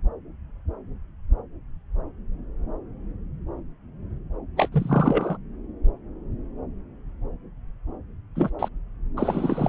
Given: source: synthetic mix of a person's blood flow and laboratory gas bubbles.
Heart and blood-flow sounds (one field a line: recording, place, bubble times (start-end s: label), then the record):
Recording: Doppler ultrasound of blood flow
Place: subclavian vein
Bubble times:
4.56-4.69 s: bubbles
4.72-5.38 s: bubbles
8.35-8.50 s: bubbles
8.59-8.69 s: bubbles
9.17-9.69 s: bubbles
From the record:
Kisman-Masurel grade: 223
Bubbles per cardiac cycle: several, 3 to 8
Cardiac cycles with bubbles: 10 to 50%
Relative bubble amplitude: loud (0.450 to 0.775)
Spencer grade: 2 (many but less than half of the cardiac periods contain bubble signals, singularly or in groups)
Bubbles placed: anywhere in the cardiac cycle